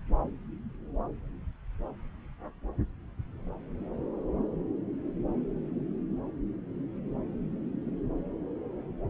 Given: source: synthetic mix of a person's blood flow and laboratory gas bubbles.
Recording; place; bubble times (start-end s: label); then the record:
Doppler ultrasound of blood flow; subclavian vein
no bubbles
From the record:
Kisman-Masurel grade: 000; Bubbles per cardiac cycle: 0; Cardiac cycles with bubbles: 0%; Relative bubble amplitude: no bubbles discernible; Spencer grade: 0 (complete lack of bubble signals)